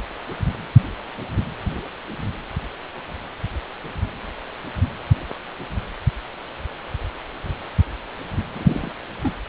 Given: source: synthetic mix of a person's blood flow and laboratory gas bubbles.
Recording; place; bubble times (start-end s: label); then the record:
Doppler ultrasound of blood flow; precordium
8.54-8.91 s: bubbles
9.23-9.36 s: bubbles
From the record:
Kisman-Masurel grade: 211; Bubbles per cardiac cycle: several, 3 to 8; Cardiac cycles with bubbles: 1 to 10%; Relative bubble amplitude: barely perceptible (0.100 to 0.250); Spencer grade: 1 (occasional bubble signal discernible with the cardiac motion signal, with majority of cardiac periods free of bubbles); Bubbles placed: anywhere in the cardiac cycle